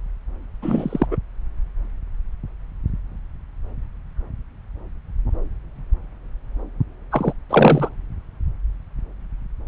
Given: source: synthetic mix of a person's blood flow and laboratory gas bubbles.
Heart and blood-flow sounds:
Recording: Doppler ultrasound of blood flow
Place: subclavian vein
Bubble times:
0.61-1.06 s: bubbles
1.11-1.16 s: bubbles
7.11-7.33 s: bubbles
7.50-7.90 s: bubbles
From the record:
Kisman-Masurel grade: 223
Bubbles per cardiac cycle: several, 3 to 8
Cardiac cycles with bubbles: 10 to 50%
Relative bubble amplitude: loud (0.450 to 0.775)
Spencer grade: 2 (many but less than half of the cardiac periods contain bubble signals, singularly or in groups)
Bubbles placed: anywhere in the cardiac cycle

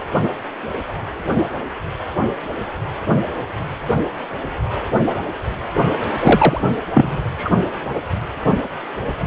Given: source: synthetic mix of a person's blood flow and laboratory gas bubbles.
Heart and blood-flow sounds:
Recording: Doppler ultrasound of blood flow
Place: precordium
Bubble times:
6.14-6.59 s: bubbles
6.94-7.18 s: bubbles
7.38-7.50 s: bubbles
From the record:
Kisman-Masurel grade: 213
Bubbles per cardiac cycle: several, 3 to 8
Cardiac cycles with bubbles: 1 to 10%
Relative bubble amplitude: loud (0.450 to 0.775)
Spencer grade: 1 (occasional bubble signal discernible with the cardiac motion signal, with majority of cardiac periods free of bubbles)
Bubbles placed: anywhere in the cardiac cycle

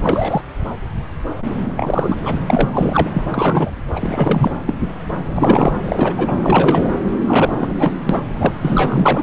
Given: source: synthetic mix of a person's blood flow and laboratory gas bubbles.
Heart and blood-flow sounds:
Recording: Doppler ultrasound of blood flow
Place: subclavian vein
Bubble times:
0.01-0.41 s: bubbles
1.77-2.17 s: bubbles
2.23-2.41 s: bubbles
2.47-2.69 s: bubbles
2.72-3.09 s: bubbles
3.13-3.23 s: bubbles
3.31-3.71 s: bubbles
3.96-4.50 s: bubbles
4.67-4.78 s: bubbles
5.35-5.72 s: bubbles
5.83-6.38 s: bubbles
6.41-6.96 s: bubbles
7.26-7.75 s: bubbles
7.79-7.94 s: bubbles
8.09-8.22 s: bubbles
8.29-8.54 s: bubbles
8.61-9.22 s: bubbles
From the record:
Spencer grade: 3 (all of the cardiac periods contain showers or single bubble signals, but not dominating or overriding the cardiac motion signals)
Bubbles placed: anywhere in the cardiac cycle

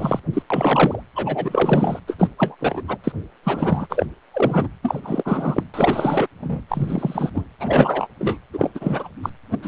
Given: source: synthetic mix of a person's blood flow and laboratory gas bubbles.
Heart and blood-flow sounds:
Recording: Doppler ultrasound of blood flow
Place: precordium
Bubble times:
0.00-0.19 s: bubbles
0.33-0.42 s: bubbles
0.50-1.03 s: bubbles
1.15-1.99 s: bubbles
2.07-2.16 s: bubbles
2.19-2.27 s: bubbles
2.38-2.55 s: bubbles
2.59-2.82 s: bubbles
2.88-2.97 s: bubbles
3.03-3.12 s: bubbles
3.43-3.87 s: bubbles
3.89-4.05 s: bubbles
4.33-4.68 s: bubbles
4.83-5.00 s: bubbles
5.03-5.63 s: bubbles
5.73-6.28 s: bubbles
6.41-6.62 s: bubbles
6.68-7.31 s: bubbles
7.34-7.45 s: bubbles
7.59-8.09 s: bubbles
8.19-8.38 s: bubbles
8.53-8.71 s: bubbles
8.74-9.09 s: bubbles
9.22-9.29 s: bubbles
9.51-9.58 s: bubbles
9.62-9.68 s: bubbles
From the record:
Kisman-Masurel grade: 343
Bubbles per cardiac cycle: rolling drumbeat, 9 or more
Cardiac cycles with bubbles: 100%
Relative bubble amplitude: loud (0.450 to 0.775)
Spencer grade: 3 (all of the cardiac periods contain showers or single bubble signals, but not dominating or overriding the cardiac motion signals)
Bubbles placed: anywhere in the cardiac cycle

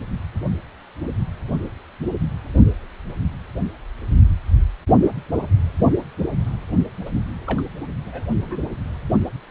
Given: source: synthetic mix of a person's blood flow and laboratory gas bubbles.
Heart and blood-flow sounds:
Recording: Doppler ultrasound of blood flow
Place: precordium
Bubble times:
7.05-7.10 s: bubbles
7.46-7.62 s: bubbles
8.05-8.25 s: bubbles
8.43-8.57 s: bubbles
From the record:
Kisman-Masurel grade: 121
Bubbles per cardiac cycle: 1 to 2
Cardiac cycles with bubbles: 10 to 50%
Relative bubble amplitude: barely perceptible (0.100 to 0.250)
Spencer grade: 2 (many but less than half of the cardiac periods contain bubble signals, singularly or in groups)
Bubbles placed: only in the low amplitude regions of the cardiac cycle

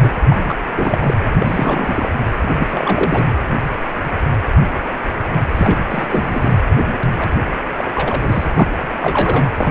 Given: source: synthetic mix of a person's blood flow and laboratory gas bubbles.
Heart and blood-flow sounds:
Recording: Doppler ultrasound of blood flow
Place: precordium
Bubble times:
0.00-0.09 s: bubbles
0.22-0.54 s: bubbles
0.76-1.14 s: bubbles
1.33-2.09 s: bubbles
2.30-3.32 s: bubbles
5.54-5.78 s: bubbles
5.90-6.58 s: bubbles
7.17-7.37 s: bubbles
7.76-8.45 s: bubbles
8.53-8.69 s: bubbles
8.81-9.50 s: bubbles
9.57-9.70 s: bubbles
From the record:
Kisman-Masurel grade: 332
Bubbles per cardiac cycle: rolling drumbeat, 9 or more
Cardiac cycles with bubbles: 50 to 99%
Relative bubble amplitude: moderate (0.250 to 0.450)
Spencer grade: 3 (all of the cardiac periods contain showers or single bubble signals, but not dominating or overriding the cardiac motion signals)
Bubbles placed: anywhere in the cardiac cycle

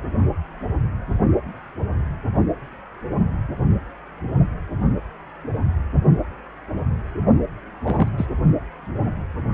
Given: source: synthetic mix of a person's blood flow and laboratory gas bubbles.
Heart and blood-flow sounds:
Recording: Doppler ultrasound of blood flow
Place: precordium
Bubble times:
7.84-8.09 s: bubbles
8.18-8.26 s: bubbles
From the record:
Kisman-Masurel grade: 112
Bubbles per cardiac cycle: 1 to 2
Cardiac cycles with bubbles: 1 to 10%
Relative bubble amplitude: moderate (0.250 to 0.450)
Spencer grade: 1 (occasional bubble signal discernible with the cardiac motion signal, with majority of cardiac periods free of bubbles)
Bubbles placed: only in the low amplitude regions of the cardiac cycle

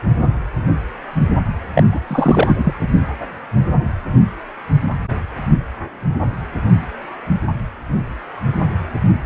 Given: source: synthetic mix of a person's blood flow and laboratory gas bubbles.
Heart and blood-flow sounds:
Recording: Doppler ultrasound of blood flow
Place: precordium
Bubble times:
1.73-1.83 s: bubbles
1.92-2.00 s: bubbles
2.07-2.73 s: bubbles
2.80-2.88 s: bubbles
From the record:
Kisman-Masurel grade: 213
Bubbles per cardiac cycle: several, 3 to 8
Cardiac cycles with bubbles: 1 to 10%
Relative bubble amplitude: loud (0.450 to 0.775)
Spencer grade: 1 (occasional bubble signal discernible with the cardiac motion signal, with majority of cardiac periods free of bubbles)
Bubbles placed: only in the low amplitude regions of the cardiac cycle

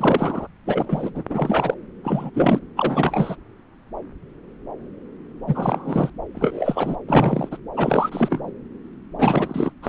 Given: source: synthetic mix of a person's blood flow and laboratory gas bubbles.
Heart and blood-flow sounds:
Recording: Doppler ultrasound of blood flow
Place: subclavian vein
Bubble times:
0.00-0.47 s: bubbles
0.65-1.10 s: bubbles
1.14-1.23 s: bubbles
1.29-1.74 s: bubbles
2.04-2.31 s: bubbles
2.34-2.59 s: bubbles
2.76-3.35 s: bubbles
5.47-6.10 s: bubbles
6.35-6.96 s: bubbles
7.08-7.58 s: bubbles
7.75-8.51 s: bubbles
9.18-9.72 s: bubbles
9.83-9.88 s: bubbles
From the record:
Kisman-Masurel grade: 333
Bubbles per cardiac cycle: rolling drumbeat, 9 or more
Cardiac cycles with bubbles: 50 to 99%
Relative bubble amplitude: loud (0.450 to 0.775)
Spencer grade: 3 (all of the cardiac periods contain showers or single bubble signals, but not dominating or overriding the cardiac motion signals)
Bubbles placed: anywhere in the cardiac cycle

